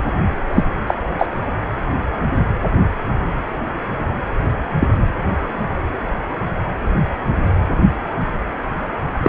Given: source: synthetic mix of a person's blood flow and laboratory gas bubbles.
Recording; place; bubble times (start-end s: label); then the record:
Doppler ultrasound of blood flow; precordium
0.53-0.64 s: bubbles
0.86-0.94 s: bubbles
1.18-1.28 s: bubbles
4.80-4.87 s: bubbles
9.22-9.28 s: bubbles
From the record:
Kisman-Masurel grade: 123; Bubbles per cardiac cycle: 1 to 2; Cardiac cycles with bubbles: 10 to 50%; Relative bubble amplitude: loud (0.450 to 0.775); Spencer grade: 2 (many but less than half of the cardiac periods contain bubble signals, singularly or in groups); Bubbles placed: anywhere in the cardiac cycle